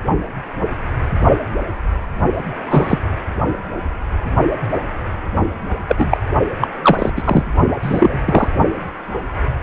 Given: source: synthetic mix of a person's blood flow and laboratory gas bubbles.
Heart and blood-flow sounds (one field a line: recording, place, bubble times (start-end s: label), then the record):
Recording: Doppler ultrasound of blood flow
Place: precordium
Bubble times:
2.66-2.98 s: bubbles
5.88-6.18 s: bubbles
6.61-6.68 s: bubbles
6.83-7.10 s: bubbles
7.17-7.44 s: bubbles
7.82-8.48 s: bubbles
From the record:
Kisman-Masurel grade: 223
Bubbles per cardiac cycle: several, 3 to 8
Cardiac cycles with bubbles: 10 to 50%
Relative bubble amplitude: loud (0.450 to 0.775)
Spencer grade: 2 (many but less than half of the cardiac periods contain bubble signals, singularly or in groups)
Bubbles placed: only in the low amplitude regions of the cardiac cycle